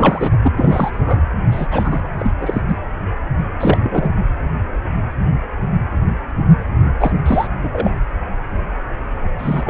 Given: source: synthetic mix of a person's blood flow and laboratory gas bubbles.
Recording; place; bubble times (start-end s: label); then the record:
Doppler ultrasound of blood flow; precordium
0.00-0.36 s: bubbles
0.43-0.52 s: bubbles
0.58-1.22 s: bubbles
1.52-1.67 s: bubbles
1.71-2.02 s: bubbles
2.19-2.31 s: bubbles
2.40-2.62 s: bubbles
2.67-2.76 s: bubbles
3.58-4.11 s: bubbles
6.99-7.12 s: bubbles
7.25-7.47 s: bubbles
7.62-7.91 s: bubbles
9.38-9.70 s: bubbles
From the record:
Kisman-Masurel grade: 233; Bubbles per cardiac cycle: several, 3 to 8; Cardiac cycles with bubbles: 50 to 99%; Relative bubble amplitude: loud (0.450 to 0.775); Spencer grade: 3 (all of the cardiac periods contain showers or single bubble signals, but not dominating or overriding the cardiac motion signals); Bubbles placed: anywhere in the cardiac cycle